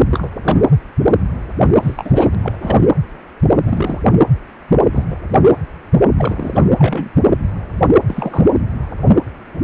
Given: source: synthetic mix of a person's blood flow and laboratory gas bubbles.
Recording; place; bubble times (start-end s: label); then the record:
Doppler ultrasound of blood flow; precordium
0.11-0.28 s: bubbles
0.42-0.62 s: bubbles
1.62-1.69 s: bubbles
1.75-2.35 s: bubbles
2.38-2.58 s: bubbles
2.61-2.80 s: bubbles
3.67-4.01 s: bubbles
4.91-5.05 s: bubbles
5.10-5.16 s: bubbles
6.17-6.60 s: bubbles
6.78-7.10 s: bubbles
8.08-8.44 s: bubbles
From the record:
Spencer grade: 3 (all of the cardiac periods contain showers or single bubble signals, but not dominating or overriding the cardiac motion signals); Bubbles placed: anywhere in the cardiac cycle